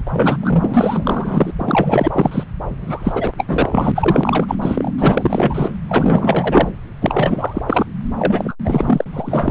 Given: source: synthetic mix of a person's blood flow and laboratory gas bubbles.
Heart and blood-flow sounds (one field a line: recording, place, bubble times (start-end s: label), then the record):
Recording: Doppler ultrasound of blood flow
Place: subclavian vein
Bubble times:
0.04-0.36 s: bubbles
0.40-1.51 s: bubbles
1.58-2.44 s: bubbles
2.80-3.33 s: bubbles
3.37-3.45 s: bubbles
3.48-3.92 s: bubbles
3.94-4.55 s: bubbles
4.61-4.92 s: bubbles
4.98-5.71 s: bubbles
5.88-6.68 s: bubbles
7.01-7.61 s: bubbles
7.67-7.86 s: bubbles
8.17-8.55 s: bubbles
8.64-9.04 s: bubbles
9.12-9.51 s: bubbles
From the record:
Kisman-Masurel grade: 444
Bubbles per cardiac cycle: continuous sound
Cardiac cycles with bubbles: 100%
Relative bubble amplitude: maximal (0.775 to 0.999)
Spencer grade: 4 (maximum detectable bubble signal sounding continuously throughout systole and diastole of every cardiac period, and overriding the amplitude of the normal cardiac signals)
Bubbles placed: anywhere in the cardiac cycle